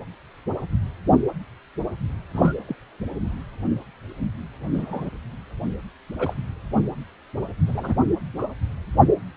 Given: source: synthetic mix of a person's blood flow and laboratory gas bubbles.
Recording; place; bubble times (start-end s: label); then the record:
Doppler ultrasound of blood flow; precordium
2.31-2.53 s: bubbles
2.68-2.75 s: bubbles
4.74-5.10 s: bubbles
6.19-6.34 s: bubbles
7.66-7.95 s: bubbles
8.38-8.46 s: bubbles
From the record:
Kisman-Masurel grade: 121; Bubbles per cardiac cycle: 1 to 2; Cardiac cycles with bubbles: 10 to 50%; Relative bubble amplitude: barely perceptible (0.100 to 0.250); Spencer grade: 2 (many but less than half of the cardiac periods contain bubble signals, singularly or in groups); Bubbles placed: anywhere in the cardiac cycle